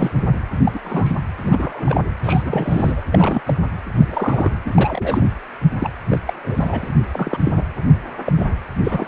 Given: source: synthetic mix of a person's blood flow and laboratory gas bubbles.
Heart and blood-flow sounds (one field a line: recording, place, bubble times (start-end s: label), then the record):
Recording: Doppler ultrasound of blood flow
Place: precordium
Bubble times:
0.00-0.12 s: bubbles
0.64-0.78 s: bubbles
0.83-1.17 s: bubbles
1.42-2.04 s: bubbles
2.23-3.01 s: bubbles
3.12-3.42 s: bubbles
3.46-3.54 s: bubbles
3.97-4.51 s: bubbles
4.64-5.27 s: bubbles
5.79-5.89 s: bubbles
6.10-6.19 s: bubbles
6.25-6.94 s: bubbles
7.04-7.38 s: bubbles
7.45-7.52 s: bubbles
7.56-7.63 s: bubbles
8.24-8.46 s: bubbles
8.83-9.08 s: bubbles
From the record:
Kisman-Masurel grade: 242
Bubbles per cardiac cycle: several, 3 to 8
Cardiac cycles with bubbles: 100%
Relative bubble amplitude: moderate (0.250 to 0.450)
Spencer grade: 3 (all of the cardiac periods contain showers or single bubble signals, but not dominating or overriding the cardiac motion signals)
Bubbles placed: anywhere in the cardiac cycle